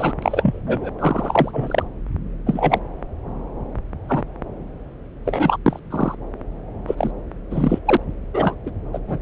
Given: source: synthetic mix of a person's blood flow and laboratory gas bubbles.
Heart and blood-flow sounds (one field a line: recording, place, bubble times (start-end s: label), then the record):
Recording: Doppler ultrasound of blood flow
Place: subclavian vein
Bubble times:
0.00-0.13 s: bubbles
0.22-0.60 s: bubbles
0.67-0.90 s: bubbles
0.98-1.83 s: bubbles
2.46-2.78 s: bubbles
4.08-4.23 s: bubbles
5.26-5.57 s: bubbles
5.66-5.79 s: bubbles
5.91-6.15 s: bubbles
6.87-7.11 s: bubbles
7.51-7.79 s: bubbles
7.86-7.97 s: bubbles
8.34-8.55 s: bubbles
8.66-8.71 s: bubbles
8.93-8.99 s: bubbles
9.08-9.20 s: bubbles
From the record:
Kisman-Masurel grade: 243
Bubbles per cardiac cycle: several, 3 to 8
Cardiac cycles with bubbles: 100%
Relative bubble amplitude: loud (0.450 to 0.775)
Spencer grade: 3 (all of the cardiac periods contain showers or single bubble signals, but not dominating or overriding the cardiac motion signals)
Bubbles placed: anywhere in the cardiac cycle